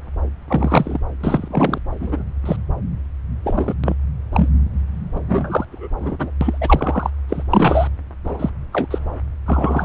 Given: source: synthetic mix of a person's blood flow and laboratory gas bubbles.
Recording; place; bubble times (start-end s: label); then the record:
Doppler ultrasound of blood flow; subclavian vein
0.48-0.99 s: bubbles
1.20-1.78 s: bubbles
2.00-2.23 s: bubbles
2.45-2.57 s: bubbles
3.44-3.74 s: bubbles
3.83-3.95 s: bubbles
4.33-4.49 s: bubbles
5.12-5.65 s: bubbles
5.71-5.90 s: bubbles
6.00-6.31 s: bubbles
6.41-6.58 s: bubbles
6.61-7.10 s: bubbles
7.29-7.42 s: bubbles
7.50-7.88 s: bubbles
8.24-8.50 s: bubbles
8.72-8.87 s: bubbles
8.90-8.98 s: bubbles
9.46-9.85 s: bubbles
From the record:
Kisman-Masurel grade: 243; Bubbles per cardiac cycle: several, 3 to 8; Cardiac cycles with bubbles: 100%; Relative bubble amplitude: loud (0.450 to 0.775); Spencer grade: 3 (all of the cardiac periods contain showers or single bubble signals, but not dominating or overriding the cardiac motion signals); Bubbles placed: anywhere in the cardiac cycle